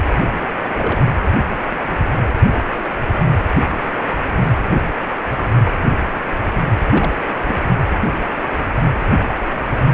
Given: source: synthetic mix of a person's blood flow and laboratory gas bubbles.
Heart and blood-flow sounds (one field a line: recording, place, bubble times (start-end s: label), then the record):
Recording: Doppler ultrasound of blood flow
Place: precordium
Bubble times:
0.76-0.99 s: bubbles
6.89-7.12 s: bubbles
7.44-7.54 s: bubbles
From the record:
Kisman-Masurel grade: 122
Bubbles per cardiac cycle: 1 to 2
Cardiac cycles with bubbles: 10 to 50%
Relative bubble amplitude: moderate (0.250 to 0.450)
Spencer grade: 2 (many but less than half of the cardiac periods contain bubble signals, singularly or in groups)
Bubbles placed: anywhere in the cardiac cycle